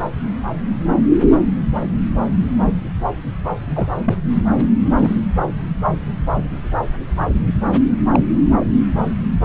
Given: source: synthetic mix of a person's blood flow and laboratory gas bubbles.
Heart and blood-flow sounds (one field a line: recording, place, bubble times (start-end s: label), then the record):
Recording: Doppler ultrasound of blood flow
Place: subclavian vein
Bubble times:
3.75-3.87 s: bubbles
4.06-4.14 s: bubbles
4.99-5.15 s: bubbles
8.12-8.20 s: bubbles
From the record:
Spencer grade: 2 (many but less than half of the cardiac periods contain bubble signals, singularly or in groups)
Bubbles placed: anywhere in the cardiac cycle